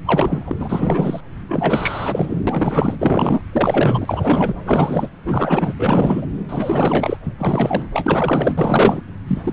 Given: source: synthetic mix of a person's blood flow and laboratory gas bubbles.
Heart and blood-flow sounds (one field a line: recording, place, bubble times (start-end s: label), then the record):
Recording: Doppler ultrasound of blood flow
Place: subclavian vein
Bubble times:
0.05-1.20 s: bubbles
1.47-2.42 s: bubbles
2.47-2.96 s: bubbles
2.99-3.42 s: bubbles
3.53-4.57 s: bubbles
4.65-5.10 s: bubbles
5.25-5.75 s: bubbles
5.79-6.27 s: bubbles
6.49-7.17 s: bubbles
7.40-7.88 s: bubbles
7.93-9.02 s: bubbles
9.28-9.53 s: bubbles
From the record:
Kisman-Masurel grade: 444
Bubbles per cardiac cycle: continuous sound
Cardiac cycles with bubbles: 100%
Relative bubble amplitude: maximal (0.775 to 0.999)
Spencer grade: 4 (maximum detectable bubble signal sounding continuously throughout systole and diastole of every cardiac period, and overriding the amplitude of the normal cardiac signals)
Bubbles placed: anywhere in the cardiac cycle